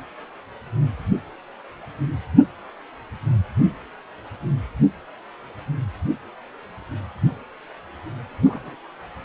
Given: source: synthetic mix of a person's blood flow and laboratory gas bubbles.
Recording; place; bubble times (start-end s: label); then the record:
Doppler ultrasound of blood flow; precordium
8.45-8.76 s: bubbles
From the record:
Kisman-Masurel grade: 111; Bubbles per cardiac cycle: 1 to 2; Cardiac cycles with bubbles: 1 to 10%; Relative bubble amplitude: barely perceptible (0.100 to 0.250); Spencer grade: 1 (occasional bubble signal discernible with the cardiac motion signal, with majority of cardiac periods free of bubbles); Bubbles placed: anywhere in the cardiac cycle